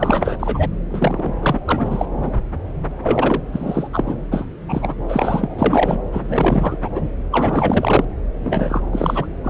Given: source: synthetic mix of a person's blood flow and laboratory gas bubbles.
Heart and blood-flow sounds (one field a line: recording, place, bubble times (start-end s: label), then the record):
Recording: Doppler ultrasound of blood flow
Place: subclavian vein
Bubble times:
0.00-0.37 s: bubbles
0.40-0.69 s: bubbles
0.90-1.34 s: bubbles
1.40-1.60 s: bubbles
1.65-2.06 s: bubbles
2.20-2.30 s: bubbles
3.03-3.42 s: bubbles
3.52-3.88 s: bubbles
3.92-4.16 s: bubbles
4.30-4.46 s: bubbles
4.68-4.95 s: bubbles
5.08-5.99 s: bubbles
6.12-6.78 s: bubbles
6.84-6.89 s: bubbles
6.95-7.01 s: bubbles
7.31-8.05 s: bubbles
8.44-8.82 s: bubbles
8.92-9.26 s: bubbles
9.43-9.50 s: bubbles
From the record:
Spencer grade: 4 (maximum detectable bubble signal sounding continuously throughout systole and diastole of every cardiac period, and overriding the amplitude of the normal cardiac signals)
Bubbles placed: anywhere in the cardiac cycle